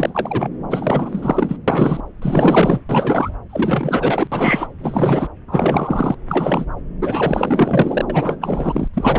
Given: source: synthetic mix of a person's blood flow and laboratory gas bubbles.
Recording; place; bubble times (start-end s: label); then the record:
Doppler ultrasound of blood flow; subclavian vein
0.00-0.49 s: bubbles
0.70-1.58 s: bubbles
1.68-2.02 s: bubbles
2.22-2.81 s: bubbles
2.89-3.35 s: bubbles
3.50-4.27 s: bubbles
4.31-4.67 s: bubbles
4.79-5.29 s: bubbles
5.47-6.15 s: bubbles
6.29-6.65 s: bubbles
7.01-8.05 s: bubbles
8.09-8.38 s: bubbles
8.41-8.88 s: bubbles
8.94-9.19 s: bubbles
From the record:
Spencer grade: 4 (maximum detectable bubble signal sounding continuously throughout systole and diastole of every cardiac period, and overriding the amplitude of the normal cardiac signals); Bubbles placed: anywhere in the cardiac cycle